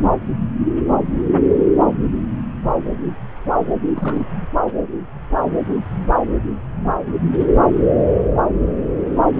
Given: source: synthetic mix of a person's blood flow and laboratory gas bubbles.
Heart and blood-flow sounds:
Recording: Doppler ultrasound of blood flow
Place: subclavian vein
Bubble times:
3.94-4.24 s: bubbles
From the record:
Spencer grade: 1 (occasional bubble signal discernible with the cardiac motion signal, with majority of cardiac periods free of bubbles)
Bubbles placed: anywhere in the cardiac cycle

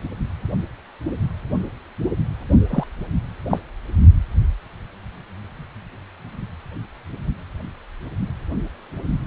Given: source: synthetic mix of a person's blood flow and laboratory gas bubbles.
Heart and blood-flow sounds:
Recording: Doppler ultrasound of blood flow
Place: precordium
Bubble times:
2.69-2.83 s: bubbles
3.49-3.58 s: bubbles
From the record:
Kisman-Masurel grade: 112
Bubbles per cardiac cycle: 1 to 2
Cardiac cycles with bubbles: 1 to 10%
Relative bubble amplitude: moderate (0.250 to 0.450)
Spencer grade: 1 (occasional bubble signal discernible with the cardiac motion signal, with majority of cardiac periods free of bubbles)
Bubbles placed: only in the low amplitude regions of the cardiac cycle

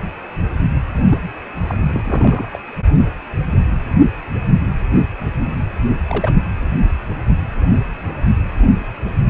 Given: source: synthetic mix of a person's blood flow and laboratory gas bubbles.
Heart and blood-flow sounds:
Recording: Doppler ultrasound of blood flow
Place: precordium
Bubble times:
1.09-1.18 s: bubbles
1.67-1.77 s: bubbles
1.85-2.50 s: bubbles
2.53-2.58 s: bubbles
6.10-6.32 s: bubbles
From the record:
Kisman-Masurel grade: 222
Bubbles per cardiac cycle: several, 3 to 8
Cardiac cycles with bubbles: 10 to 50%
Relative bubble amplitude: moderate (0.250 to 0.450)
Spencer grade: 2 (many but less than half of the cardiac periods contain bubble signals, singularly or in groups)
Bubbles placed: anywhere in the cardiac cycle

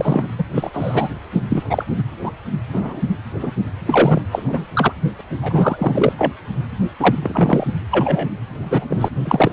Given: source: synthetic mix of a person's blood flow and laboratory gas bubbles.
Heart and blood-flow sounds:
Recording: Doppler ultrasound of blood flow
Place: precordium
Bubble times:
0.00-0.27 s: bubbles
0.38-0.43 s: bubbles
0.54-0.70 s: bubbles
0.73-1.08 s: bubbles
1.49-1.63 s: bubbles
1.70-1.85 s: bubbles
2.23-2.31 s: bubbles
2.72-3.02 s: bubbles
3.40-3.50 s: bubbles
3.85-4.22 s: bubbles
4.31-4.42 s: bubbles
4.47-4.66 s: bubbles
4.73-4.92 s: bubbles
5.19-5.21 s: bubbles
5.42-6.12 s: bubbles
6.18-6.33 s: bubbles
6.99-7.15 s: bubbles
7.22-7.65 s: bubbles
7.91-8.28 s: bubbles
8.62-8.85 s: bubbles
8.90-9.09 s: bubbles
9.25-9.53 s: bubbles
From the record:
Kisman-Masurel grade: 243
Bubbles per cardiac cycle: several, 3 to 8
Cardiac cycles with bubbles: 100%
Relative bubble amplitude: loud (0.450 to 0.775)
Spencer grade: 3 (all of the cardiac periods contain showers or single bubble signals, but not dominating or overriding the cardiac motion signals)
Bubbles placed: anywhere in the cardiac cycle

